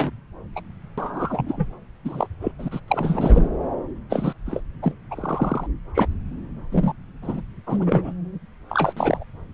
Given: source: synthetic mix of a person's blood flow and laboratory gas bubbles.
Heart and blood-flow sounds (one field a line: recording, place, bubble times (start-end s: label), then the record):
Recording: Doppler ultrasound of blood flow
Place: subclavian vein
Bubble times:
0.00-0.10 s: bubbles
0.55-0.62 s: bubbles
0.97-1.67 s: bubbles
2.04-2.28 s: bubbles
2.41-2.52 s: bubbles
2.58-2.69 s: bubbles
2.71-2.80 s: bubbles
2.88-3.50 s: bubbles
4.09-4.33 s: bubbles
4.46-4.60 s: bubbles
4.82-4.95 s: bubbles
5.11-5.67 s: bubbles
5.95-6.08 s: bubbles
6.72-6.93 s: bubbles
7.22-7.41 s: bubbles
7.67-8.12 s: bubbles
8.69-8.93 s: bubbles
8.96-9.23 s: bubbles
From the record:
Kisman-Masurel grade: 243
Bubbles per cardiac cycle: several, 3 to 8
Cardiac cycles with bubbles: 100%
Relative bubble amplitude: loud (0.450 to 0.775)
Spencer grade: 3 (all of the cardiac periods contain showers or single bubble signals, but not dominating or overriding the cardiac motion signals)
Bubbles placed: anywhere in the cardiac cycle